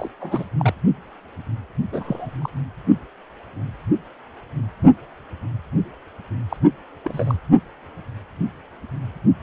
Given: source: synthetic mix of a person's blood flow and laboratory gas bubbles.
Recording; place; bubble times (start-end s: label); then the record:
Doppler ultrasound of blood flow; precordium
0.00-0.08 s: bubbles
0.20-0.45 s: bubbles
0.58-0.74 s: bubbles
1.91-2.38 s: bubbles
2.42-2.50 s: bubbles
6.49-6.56 s: bubbles
7.05-7.38 s: bubbles
From the record:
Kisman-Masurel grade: 221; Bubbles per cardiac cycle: several, 3 to 8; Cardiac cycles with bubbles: 10 to 50%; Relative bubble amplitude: barely perceptible (0.100 to 0.250); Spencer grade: 2 (many but less than half of the cardiac periods contain bubble signals, singularly or in groups); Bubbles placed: only in the low amplitude regions of the cardiac cycle